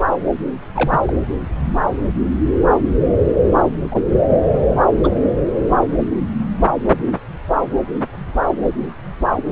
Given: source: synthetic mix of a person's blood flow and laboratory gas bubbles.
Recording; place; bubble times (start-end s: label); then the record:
Doppler ultrasound of blood flow; subclavian vein
0.74-1.14 s: bubbles
3.92-3.97 s: bubbles
5.04-5.10 s: bubbles
5.68-5.75 s: bubbles
From the record:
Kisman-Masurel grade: 123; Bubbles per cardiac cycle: 1 to 2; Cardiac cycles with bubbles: 10 to 50%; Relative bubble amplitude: loud (0.450 to 0.775); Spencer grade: 2 (many but less than half of the cardiac periods contain bubble signals, singularly or in groups); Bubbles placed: anywhere in the cardiac cycle